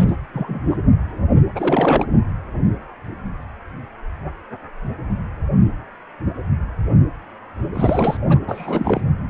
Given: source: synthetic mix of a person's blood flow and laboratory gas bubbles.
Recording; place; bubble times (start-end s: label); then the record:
Doppler ultrasound of blood flow; precordium
0.00-0.15 s: bubbles
0.33-0.60 s: bubbles
0.71-0.76 s: bubbles
1.55-2.05 s: bubbles
7.73-8.17 s: bubbles
8.29-8.39 s: bubbles
8.48-9.01 s: bubbles
From the record:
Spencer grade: 2 (many but less than half of the cardiac periods contain bubble signals, singularly or in groups); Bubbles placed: anywhere in the cardiac cycle